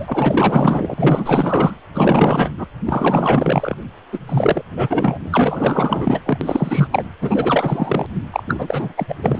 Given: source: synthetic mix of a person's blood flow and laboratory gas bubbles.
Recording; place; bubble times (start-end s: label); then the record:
Doppler ultrasound of blood flow; precordium
0.00-1.74 s: bubbles
1.94-2.50 s: bubbles
2.56-2.67 s: bubbles
2.85-3.75 s: bubbles
4.12-4.19 s: bubbles
4.29-4.62 s: bubbles
4.77-5.19 s: bubbles
5.23-6.22 s: bubbles
6.25-6.38 s: bubbles
6.41-6.88 s: bubbles
6.91-7.04 s: bubbles
7.21-8.06 s: bubbles
8.32-8.43 s: bubbles
8.47-8.92 s: bubbles
8.96-9.05 s: bubbles
9.08-9.15 s: bubbles
9.22-9.39 s: bubbles
From the record:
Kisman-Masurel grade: 444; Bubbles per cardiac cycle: continuous sound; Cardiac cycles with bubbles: 100%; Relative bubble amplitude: maximal (0.775 to 0.999); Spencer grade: 4 (maximum detectable bubble signal sounding continuously throughout systole and diastole of every cardiac period, and overriding the amplitude of the normal cardiac signals); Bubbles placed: anywhere in the cardiac cycle